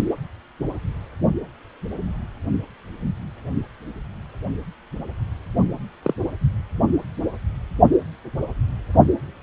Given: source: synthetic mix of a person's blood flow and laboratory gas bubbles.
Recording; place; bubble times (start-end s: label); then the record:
Doppler ultrasound of blood flow; precordium
6.02-6.14 s: bubbles
From the record:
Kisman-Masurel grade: 122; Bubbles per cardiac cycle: 1 to 2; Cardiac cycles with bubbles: 10 to 50%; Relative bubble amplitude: moderate (0.250 to 0.450); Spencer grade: 2 (many but less than half of the cardiac periods contain bubble signals, singularly or in groups); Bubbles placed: only in the low amplitude regions of the cardiac cycle